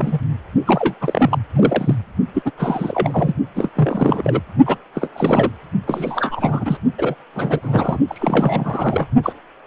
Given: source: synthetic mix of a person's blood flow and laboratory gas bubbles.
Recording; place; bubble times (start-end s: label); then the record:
Doppler ultrasound of blood flow; precordium
0.00-0.20 s: bubbles
0.66-0.94 s: bubbles
1.01-1.39 s: bubbles
1.56-1.95 s: bubbles
2.34-2.42 s: bubbles
2.45-2.51 s: bubbles
2.57-3.34 s: bubbles
3.55-3.71 s: bubbles
3.75-4.41 s: bubbles
4.66-4.77 s: bubbles
4.95-5.09 s: bubbles
5.15-5.50 s: bubbles
5.87-6.77 s: bubbles
6.98-7.14 s: bubbles
7.35-7.59 s: bubbles
7.62-7.98 s: bubbles
8.07-9.06 s: bubbles
9.23-9.33 s: bubbles
From the record:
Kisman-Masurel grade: 342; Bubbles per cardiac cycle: rolling drumbeat, 9 or more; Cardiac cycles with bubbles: 100%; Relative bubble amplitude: moderate (0.250 to 0.450); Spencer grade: 3 (all of the cardiac periods contain showers or single bubble signals, but not dominating or overriding the cardiac motion signals); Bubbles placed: only in the low amplitude regions of the cardiac cycle